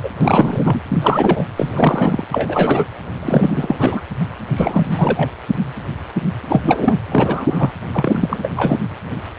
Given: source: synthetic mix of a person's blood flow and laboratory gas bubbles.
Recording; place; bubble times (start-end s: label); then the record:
Doppler ultrasound of blood flow; precordium
0.03-0.11 s: bubbles
0.21-0.81 s: bubbles
0.88-1.45 s: bubbles
1.57-2.24 s: bubbles
2.31-2.85 s: bubbles
3.22-4.01 s: bubbles
4.56-4.87 s: bubbles
4.91-5.30 s: bubbles
6.49-6.99 s: bubbles
7.11-7.72 s: bubbles
7.92-8.52 s: bubbles
8.56-8.78 s: bubbles
From the record:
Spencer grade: 3 (all of the cardiac periods contain showers or single bubble signals, but not dominating or overriding the cardiac motion signals); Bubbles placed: anywhere in the cardiac cycle